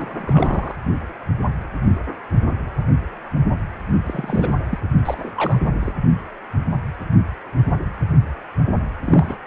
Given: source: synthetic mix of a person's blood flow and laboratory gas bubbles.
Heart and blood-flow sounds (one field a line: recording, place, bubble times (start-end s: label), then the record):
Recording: Doppler ultrasound of blood flow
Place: precordium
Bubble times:
0.00-0.76 s: bubbles
4.05-4.53 s: bubbles
4.71-4.79 s: bubbles
5.05-5.33 s: bubbles
5.36-5.59 s: bubbles
5.81-5.93 s: bubbles
9.04-9.38 s: bubbles
From the record:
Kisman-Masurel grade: 222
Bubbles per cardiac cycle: several, 3 to 8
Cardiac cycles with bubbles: 10 to 50%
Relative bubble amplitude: moderate (0.250 to 0.450)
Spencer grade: 2 (many but less than half of the cardiac periods contain bubble signals, singularly or in groups)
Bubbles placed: only in the low amplitude regions of the cardiac cycle